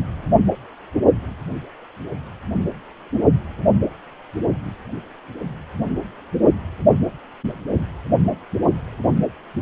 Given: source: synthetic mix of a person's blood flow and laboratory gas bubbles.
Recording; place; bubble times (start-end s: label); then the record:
Doppler ultrasound of blood flow; precordium
no bubbles
From the record:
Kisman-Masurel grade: 000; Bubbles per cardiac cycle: 0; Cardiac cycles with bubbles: 0%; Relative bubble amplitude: no bubbles discernible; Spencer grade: 0 (complete lack of bubble signals)